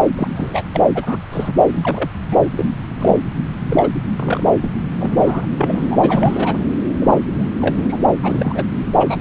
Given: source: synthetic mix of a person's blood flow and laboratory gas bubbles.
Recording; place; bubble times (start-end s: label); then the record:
Doppler ultrasound of blood flow; subclavian vein
0.18-0.28 s: bubbles
0.35-0.62 s: bubbles
0.73-0.81 s: bubbles
0.95-1.17 s: bubbles
1.31-1.53 s: bubbles
1.72-2.09 s: bubbles
2.31-2.50 s: bubbles
2.56-2.69 s: bubbles
3.00-3.17 s: bubbles
3.69-3.89 s: bubbles
4.19-4.49 s: bubbles
4.62-4.71 s: bubbles
5.00-5.46 s: bubbles
5.58-6.66 s: bubbles
7.00-7.19 s: bubbles
7.39-7.45 s: bubbles
7.62-7.98 s: bubbles
8.23-8.66 s: bubbles
8.99-9.21 s: bubbles
From the record:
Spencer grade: 3 (all of the cardiac periods contain showers or single bubble signals, but not dominating or overriding the cardiac motion signals); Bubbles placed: anywhere in the cardiac cycle